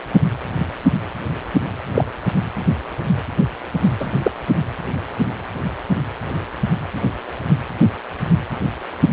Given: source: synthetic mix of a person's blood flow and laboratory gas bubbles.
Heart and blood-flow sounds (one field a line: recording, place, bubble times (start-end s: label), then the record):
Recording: Doppler ultrasound of blood flow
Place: precordium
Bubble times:
1.94-2.04 s: bubbles
4.00-4.08 s: bubbles
4.22-4.31 s: bubbles
From the record:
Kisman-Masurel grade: 123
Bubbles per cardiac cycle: 1 to 2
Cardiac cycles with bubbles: 10 to 50%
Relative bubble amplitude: loud (0.450 to 0.775)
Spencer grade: 2 (many but less than half of the cardiac periods contain bubble signals, singularly or in groups)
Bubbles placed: anywhere in the cardiac cycle